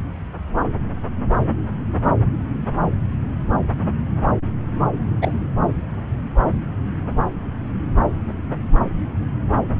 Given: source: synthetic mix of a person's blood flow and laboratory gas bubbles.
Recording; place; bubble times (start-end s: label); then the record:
Doppler ultrasound of blood flow; subclavian vein
5.22-5.33 s: bubbles
From the record:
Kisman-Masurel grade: 113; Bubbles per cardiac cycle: 1 to 2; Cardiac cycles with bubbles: 1 to 10%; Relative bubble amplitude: loud (0.450 to 0.775); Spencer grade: 1 (occasional bubble signal discernible with the cardiac motion signal, with majority of cardiac periods free of bubbles); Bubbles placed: anywhere in the cardiac cycle